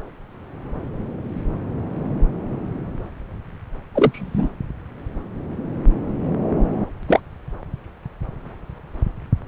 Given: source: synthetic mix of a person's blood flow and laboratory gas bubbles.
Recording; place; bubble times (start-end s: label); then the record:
Doppler ultrasound of blood flow; subclavian vein
3.94-4.52 s: bubbles
7.08-7.20 s: bubbles
From the record:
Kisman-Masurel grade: 113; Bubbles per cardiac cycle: 1 to 2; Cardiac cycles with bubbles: 1 to 10%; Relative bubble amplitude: loud (0.450 to 0.775); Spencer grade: 1 (occasional bubble signal discernible with the cardiac motion signal, with majority of cardiac periods free of bubbles); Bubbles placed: anywhere in the cardiac cycle